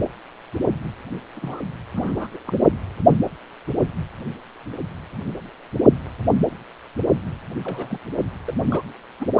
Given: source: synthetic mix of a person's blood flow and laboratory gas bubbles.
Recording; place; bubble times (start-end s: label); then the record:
Doppler ultrasound of blood flow; precordium
1.35-1.60 s: bubbles
1.95-2.27 s: bubbles
2.31-2.38 s: bubbles
2.47-2.71 s: bubbles
7.64-7.99 s: bubbles
8.47-8.54 s: bubbles
8.70-8.83 s: bubbles
9.20-9.28 s: bubbles
From the record:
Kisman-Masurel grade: 221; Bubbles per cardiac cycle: several, 3 to 8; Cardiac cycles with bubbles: 10 to 50%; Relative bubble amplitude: barely perceptible (0.100 to 0.250); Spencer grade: 2 (many but less than half of the cardiac periods contain bubble signals, singularly or in groups); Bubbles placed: only in the low amplitude regions of the cardiac cycle